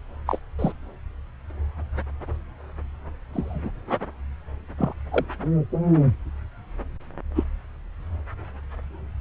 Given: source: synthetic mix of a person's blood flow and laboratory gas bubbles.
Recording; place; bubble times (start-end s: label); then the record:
Doppler ultrasound of blood flow; subclavian vein
0.26-0.39 s: bubbles
0.58-0.72 s: bubbles
3.33-3.71 s: bubbles
4.78-4.93 s: bubbles
5.11-5.25 s: bubbles
7.36-7.44 s: bubbles
From the record:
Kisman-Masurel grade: 122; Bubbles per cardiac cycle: 1 to 2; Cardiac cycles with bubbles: 10 to 50%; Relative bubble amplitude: moderate (0.250 to 0.450); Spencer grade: 2 (many but less than half of the cardiac periods contain bubble signals, singularly or in groups); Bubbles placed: anywhere in the cardiac cycle